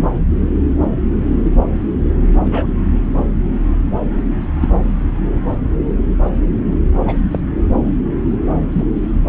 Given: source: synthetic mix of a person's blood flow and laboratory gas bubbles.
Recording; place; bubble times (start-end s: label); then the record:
Doppler ultrasound of blood flow; subclavian vein
2.44-2.67 s: bubbles
3.18-3.25 s: bubbles
4.60-4.68 s: bubbles
7.05-7.17 s: bubbles
7.31-7.40 s: bubbles
8.72-8.86 s: bubbles
From the record:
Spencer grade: 2 (many but less than half of the cardiac periods contain bubble signals, singularly or in groups); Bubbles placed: anywhere in the cardiac cycle